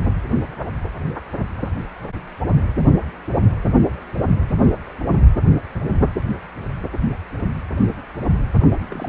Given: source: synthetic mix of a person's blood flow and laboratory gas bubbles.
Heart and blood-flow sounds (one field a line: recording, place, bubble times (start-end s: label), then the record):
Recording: Doppler ultrasound of blood flow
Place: precordium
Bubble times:
8.85-9.09 s: bubbles
From the record:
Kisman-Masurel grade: 211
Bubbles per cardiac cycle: several, 3 to 8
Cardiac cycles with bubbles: 1 to 10%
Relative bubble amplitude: barely perceptible (0.100 to 0.250)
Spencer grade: 1 (occasional bubble signal discernible with the cardiac motion signal, with majority of cardiac periods free of bubbles)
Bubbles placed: anywhere in the cardiac cycle